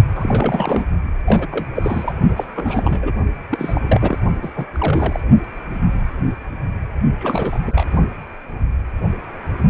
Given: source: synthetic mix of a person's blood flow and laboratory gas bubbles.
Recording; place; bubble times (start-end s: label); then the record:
Doppler ultrasound of blood flow; precordium
0.14-0.85 s: bubbles
1.26-1.47 s: bubbles
1.51-1.66 s: bubbles
1.75-2.13 s: bubbles
2.36-2.47 s: bubbles
2.55-3.12 s: bubbles
3.50-3.81 s: bubbles
3.83-4.19 s: bubbles
4.42-4.54 s: bubbles
4.56-4.65 s: bubbles
4.73-5.20 s: bubbles
7.18-7.59 s: bubbles
7.62-7.84 s: bubbles
From the record:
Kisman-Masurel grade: 332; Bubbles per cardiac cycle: rolling drumbeat, 9 or more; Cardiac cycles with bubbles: 50 to 99%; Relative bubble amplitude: moderate (0.250 to 0.450); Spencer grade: 3 (all of the cardiac periods contain showers or single bubble signals, but not dominating or overriding the cardiac motion signals); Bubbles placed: only in the low amplitude regions of the cardiac cycle